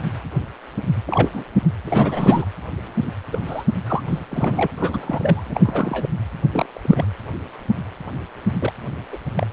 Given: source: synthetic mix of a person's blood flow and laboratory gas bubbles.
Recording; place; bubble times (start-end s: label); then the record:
Doppler ultrasound of blood flow; precordium
1.05-1.30 s: bubbles
1.32-1.45 s: bubbles
1.86-2.46 s: bubbles
3.02-3.11 s: bubbles
3.31-3.39 s: bubbles
3.46-3.64 s: bubbles
3.86-4.03 s: bubbles
4.08-4.19 s: bubbles
4.31-4.68 s: bubbles
4.77-5.61 s: bubbles
5.65-6.10 s: bubbles
6.53-6.66 s: bubbles
6.74-7.11 s: bubbles
8.55-8.72 s: bubbles
9.12-9.18 s: bubbles
9.35-9.47 s: bubbles
From the record:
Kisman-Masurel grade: 232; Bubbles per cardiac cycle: several, 3 to 8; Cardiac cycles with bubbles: 50 to 99%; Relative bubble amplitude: moderate (0.250 to 0.450); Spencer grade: 3 (all of the cardiac periods contain showers or single bubble signals, but not dominating or overriding the cardiac motion signals); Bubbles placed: anywhere in the cardiac cycle